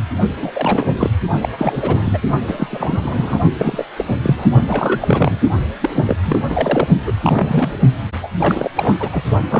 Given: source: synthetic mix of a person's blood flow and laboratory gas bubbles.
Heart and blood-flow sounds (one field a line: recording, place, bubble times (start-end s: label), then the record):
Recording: Doppler ultrasound of blood flow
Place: precordium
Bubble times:
0.35-0.52 s: bubbles
0.54-0.95 s: bubbles
0.98-1.10 s: bubbles
1.41-1.49 s: bubbles
1.58-2.18 s: bubbles
2.47-3.40 s: bubbles
3.57-3.85 s: bubbles
3.96-4.05 s: bubbles
4.08-4.16 s: bubbles
4.22-4.50 s: bubbles
4.67-5.38 s: bubbles
5.80-6.16 s: bubbles
6.25-6.40 s: bubbles
6.49-6.88 s: bubbles
7.06-7.12 s: bubbles
7.21-7.79 s: bubbles
8.21-8.28 s: bubbles
8.39-8.71 s: bubbles
8.76-8.96 s: bubbles
8.99-9.09 s: bubbles
9.12-9.23 s: bubbles
9.49-9.60 s: bubbles
From the record:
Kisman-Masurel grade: 342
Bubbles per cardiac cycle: rolling drumbeat, 9 or more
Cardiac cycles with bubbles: 100%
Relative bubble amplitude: moderate (0.250 to 0.450)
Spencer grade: 3 (all of the cardiac periods contain showers or single bubble signals, but not dominating or overriding the cardiac motion signals)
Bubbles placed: only in the low amplitude regions of the cardiac cycle